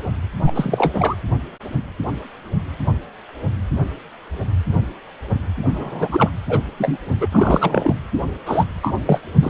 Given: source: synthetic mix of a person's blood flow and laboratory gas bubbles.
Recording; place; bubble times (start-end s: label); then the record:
Doppler ultrasound of blood flow; precordium
0.46-1.17 s: bubbles
5.74-6.30 s: bubbles
6.49-6.61 s: bubbles
6.78-6.99 s: bubbles
7.21-7.28 s: bubbles
7.32-7.93 s: bubbles
8.46-8.64 s: bubbles
8.82-8.94 s: bubbles
9.05-9.21 s: bubbles
9.41-9.50 s: bubbles
From the record:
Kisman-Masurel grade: 233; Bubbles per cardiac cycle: several, 3 to 8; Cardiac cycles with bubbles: 50 to 99%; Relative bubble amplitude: loud (0.450 to 0.775); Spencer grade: 3 (all of the cardiac periods contain showers or single bubble signals, but not dominating or overriding the cardiac motion signals); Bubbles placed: anywhere in the cardiac cycle